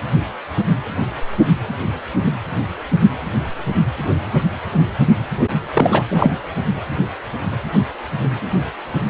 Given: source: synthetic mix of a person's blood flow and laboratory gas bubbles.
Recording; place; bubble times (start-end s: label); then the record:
Doppler ultrasound of blood flow; precordium
5.74-6.03 s: bubbles
6.10-6.39 s: bubbles
From the record:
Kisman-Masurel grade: 213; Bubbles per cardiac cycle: several, 3 to 8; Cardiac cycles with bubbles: 1 to 10%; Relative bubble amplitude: loud (0.450 to 0.775); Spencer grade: 1 (occasional bubble signal discernible with the cardiac motion signal, with majority of cardiac periods free of bubbles); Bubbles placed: anywhere in the cardiac cycle